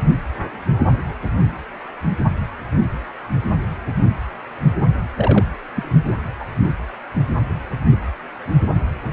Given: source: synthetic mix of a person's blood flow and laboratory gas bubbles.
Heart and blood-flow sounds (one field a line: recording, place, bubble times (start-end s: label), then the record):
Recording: Doppler ultrasound of blood flow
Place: precordium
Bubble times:
5.17-5.46 s: bubbles
5.75-6.01 s: bubbles
6.07-6.14 s: bubbles
6.38-6.45 s: bubbles
From the record:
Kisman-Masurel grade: 122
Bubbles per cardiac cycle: 1 to 2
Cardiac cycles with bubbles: 10 to 50%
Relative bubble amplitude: moderate (0.250 to 0.450)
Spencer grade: 2 (many but less than half of the cardiac periods contain bubble signals, singularly or in groups)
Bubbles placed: anywhere in the cardiac cycle